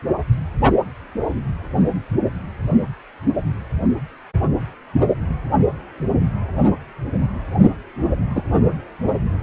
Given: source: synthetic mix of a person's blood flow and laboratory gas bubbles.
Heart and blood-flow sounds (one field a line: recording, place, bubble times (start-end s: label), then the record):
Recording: Doppler ultrasound of blood flow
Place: precordium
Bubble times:
8.35-8.43 s: bubbles
From the record:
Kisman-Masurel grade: 113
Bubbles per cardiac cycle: 1 to 2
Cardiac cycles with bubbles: 1 to 10%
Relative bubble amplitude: loud (0.450 to 0.775)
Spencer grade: 1 (occasional bubble signal discernible with the cardiac motion signal, with majority of cardiac periods free of bubbles)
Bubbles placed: anywhere in the cardiac cycle